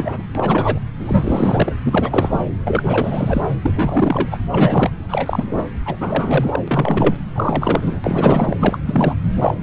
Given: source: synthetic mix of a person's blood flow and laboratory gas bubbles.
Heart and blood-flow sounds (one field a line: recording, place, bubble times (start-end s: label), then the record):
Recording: Doppler ultrasound of blood flow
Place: subclavian vein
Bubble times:
0.00-0.23 s: bubbles
0.35-0.79 s: bubbles
0.98-1.73 s: bubbles
1.86-2.45 s: bubbles
2.64-3.41 s: bubbles
3.61-4.38 s: bubbles
4.50-4.91 s: bubbles
5.09-5.65 s: bubbles
5.86-6.60 s: bubbles
6.68-7.15 s: bubbles
7.35-8.01 s: bubbles
8.04-8.56 s: bubbles
8.60-8.78 s: bubbles
8.85-9.14 s: bubbles
9.36-9.54 s: bubbles
From the record:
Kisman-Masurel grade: 343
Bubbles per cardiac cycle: rolling drumbeat, 9 or more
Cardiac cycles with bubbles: 100%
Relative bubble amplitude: loud (0.450 to 0.775)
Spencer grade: 3 (all of the cardiac periods contain showers or single bubble signals, but not dominating or overriding the cardiac motion signals)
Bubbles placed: anywhere in the cardiac cycle